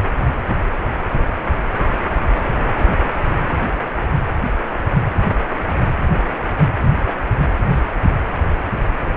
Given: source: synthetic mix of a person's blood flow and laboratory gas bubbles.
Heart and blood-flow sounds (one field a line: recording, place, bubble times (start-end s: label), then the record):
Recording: Doppler ultrasound of blood flow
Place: precordium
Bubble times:
no bubbles
From the record:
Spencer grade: 0 (complete lack of bubble signals)